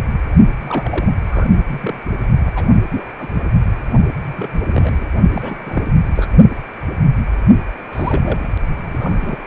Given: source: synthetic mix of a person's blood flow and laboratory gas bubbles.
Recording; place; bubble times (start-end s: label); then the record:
Doppler ultrasound of blood flow; precordium
0.58-1.11 s: bubbles
1.24-1.47 s: bubbles
1.66-1.99 s: bubbles
2.46-2.66 s: bubbles
2.92-3.04 s: bubbles
3.19-3.28 s: bubbles
3.33-3.42 s: bubbles
3.45-3.50 s: bubbles
4.21-5.07 s: bubbles
5.33-5.92 s: bubbles
6.15-6.26 s: bubbles
7.93-8.48 s: bubbles
8.86-9.37 s: bubbles
From the record:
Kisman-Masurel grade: 232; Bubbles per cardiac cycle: several, 3 to 8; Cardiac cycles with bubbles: 50 to 99%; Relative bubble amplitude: moderate (0.250 to 0.450); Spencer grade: 3 (all of the cardiac periods contain showers or single bubble signals, but not dominating or overriding the cardiac motion signals); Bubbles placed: only in the low amplitude regions of the cardiac cycle